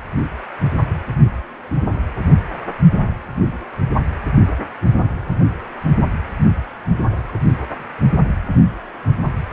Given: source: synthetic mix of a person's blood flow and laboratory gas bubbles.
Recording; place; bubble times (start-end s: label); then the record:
Doppler ultrasound of blood flow; precordium
no bubbles
From the record:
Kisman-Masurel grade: 000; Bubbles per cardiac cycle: 0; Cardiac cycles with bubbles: 0%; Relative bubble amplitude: no bubbles discernible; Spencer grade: 0 (complete lack of bubble signals)